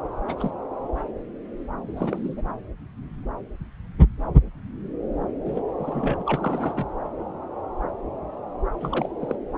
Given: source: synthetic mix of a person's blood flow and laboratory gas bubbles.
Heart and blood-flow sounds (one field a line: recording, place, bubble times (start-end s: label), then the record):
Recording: Doppler ultrasound of blood flow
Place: subclavian vein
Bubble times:
0.27-0.51 s: bubbles
1.87-2.42 s: bubbles
5.45-5.62 s: bubbles
5.78-6.22 s: bubbles
6.26-6.89 s: bubbles
8.80-9.07 s: bubbles
9.20-9.36 s: bubbles
From the record:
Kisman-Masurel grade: 221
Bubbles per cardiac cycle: several, 3 to 8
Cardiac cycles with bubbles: 10 to 50%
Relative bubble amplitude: barely perceptible (0.100 to 0.250)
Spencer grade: 2 (many but less than half of the cardiac periods contain bubble signals, singularly or in groups)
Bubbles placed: anywhere in the cardiac cycle